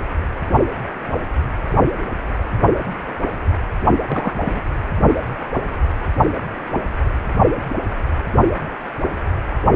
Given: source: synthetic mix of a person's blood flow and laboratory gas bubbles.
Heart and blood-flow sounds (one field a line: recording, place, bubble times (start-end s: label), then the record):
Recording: Doppler ultrasound of blood flow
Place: precordium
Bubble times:
4.06-4.36 s: bubbles
4.44-4.60 s: bubbles
From the record:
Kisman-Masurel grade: 112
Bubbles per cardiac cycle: 1 to 2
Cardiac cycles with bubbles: 1 to 10%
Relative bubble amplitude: moderate (0.250 to 0.450)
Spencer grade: 1 (occasional bubble signal discernible with the cardiac motion signal, with majority of cardiac periods free of bubbles)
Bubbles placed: anywhere in the cardiac cycle